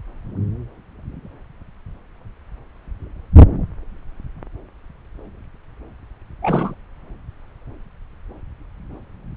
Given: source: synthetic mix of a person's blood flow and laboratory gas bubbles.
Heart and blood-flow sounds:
Doppler ultrasound of blood flow; subclavian vein
6.42-6.75 s: bubbles
From the record:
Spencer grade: 1 (occasional bubble signal discernible with the cardiac motion signal, with majority of cardiac periods free of bubbles); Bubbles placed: anywhere in the cardiac cycle

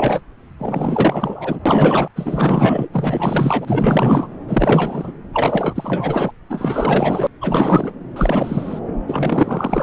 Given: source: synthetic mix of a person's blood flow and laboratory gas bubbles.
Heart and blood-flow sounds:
Doppler ultrasound of blood flow; subclavian vein
0.00-0.21 s: bubbles
0.58-1.59 s: bubbles
1.66-2.08 s: bubbles
2.16-2.89 s: bubbles
2.92-4.27 s: bubbles
4.48-5.12 s: bubbles
5.33-6.31 s: bubbles
6.49-7.27 s: bubbles
7.41-7.92 s: bubbles
8.16-8.79 s: bubbles
9.08-9.83 s: bubbles
From the record:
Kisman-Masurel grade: 444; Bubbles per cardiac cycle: continuous sound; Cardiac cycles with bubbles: 100%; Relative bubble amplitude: maximal (0.775 to 0.999); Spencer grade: 4 (maximum detectable bubble signal sounding continuously throughout systole and diastole of every cardiac period, and overriding the amplitude of the normal cardiac signals); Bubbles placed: anywhere in the cardiac cycle

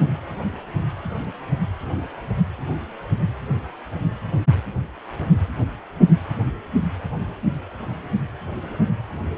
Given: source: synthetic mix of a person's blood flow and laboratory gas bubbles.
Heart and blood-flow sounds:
Doppler ultrasound of blood flow; precordium
no bubbles
From the record:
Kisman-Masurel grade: 000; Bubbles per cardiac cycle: 0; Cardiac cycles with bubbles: 0%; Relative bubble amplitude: no bubbles discernible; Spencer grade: 0 (complete lack of bubble signals)

